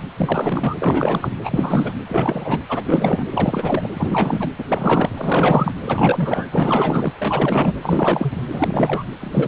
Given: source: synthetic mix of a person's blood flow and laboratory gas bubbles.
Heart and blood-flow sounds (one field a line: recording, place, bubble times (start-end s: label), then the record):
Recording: Doppler ultrasound of blood flow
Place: precordium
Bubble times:
0.00-0.03 s: bubbles
0.17-0.76 s: bubbles
0.80-1.35 s: bubbles
1.44-1.93 s: bubbles
2.08-2.60 s: bubbles
2.69-3.25 s: bubbles
3.30-3.90 s: bubbles
3.93-4.50 s: bubbles
4.58-4.65 s: bubbles
4.68-5.09 s: bubbles
5.17-5.72 s: bubbles
5.84-6.47 s: bubbles
6.52-7.12 s: bubbles
7.19-7.73 s: bubbles
7.82-8.44 s: bubbles
8.50-9.04 s: bubbles
9.21-9.48 s: bubbles
From the record:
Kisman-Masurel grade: 444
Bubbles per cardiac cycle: continuous sound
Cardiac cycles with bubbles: 100%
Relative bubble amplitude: maximal (0.775 to 0.999)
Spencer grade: 4 (maximum detectable bubble signal sounding continuously throughout systole and diastole of every cardiac period, and overriding the amplitude of the normal cardiac signals)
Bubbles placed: anywhere in the cardiac cycle